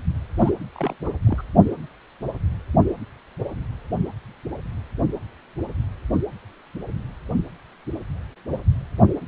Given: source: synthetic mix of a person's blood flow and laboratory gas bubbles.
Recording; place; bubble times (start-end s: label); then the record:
Doppler ultrasound of blood flow; precordium
0.38-0.50 s: bubbles
0.76-0.96 s: bubbles
1.05-1.09 s: bubbles
1.27-1.42 s: bubbles
From the record:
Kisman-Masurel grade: 211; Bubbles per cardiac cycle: several, 3 to 8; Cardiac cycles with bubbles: 1 to 10%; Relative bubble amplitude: barely perceptible (0.100 to 0.250); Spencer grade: 1 (occasional bubble signal discernible with the cardiac motion signal, with majority of cardiac periods free of bubbles); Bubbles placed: anywhere in the cardiac cycle